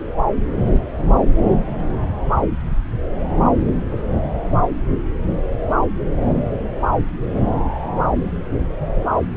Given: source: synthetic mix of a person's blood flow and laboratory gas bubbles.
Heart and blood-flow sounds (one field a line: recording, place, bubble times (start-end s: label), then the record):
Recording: Doppler ultrasound of blood flow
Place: subclavian vein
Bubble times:
3.66-4.09 s: bubbles
From the record:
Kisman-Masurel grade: 211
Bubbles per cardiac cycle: several, 3 to 8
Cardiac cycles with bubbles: 1 to 10%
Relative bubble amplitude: barely perceptible (0.100 to 0.250)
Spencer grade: 1 (occasional bubble signal discernible with the cardiac motion signal, with majority of cardiac periods free of bubbles)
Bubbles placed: anywhere in the cardiac cycle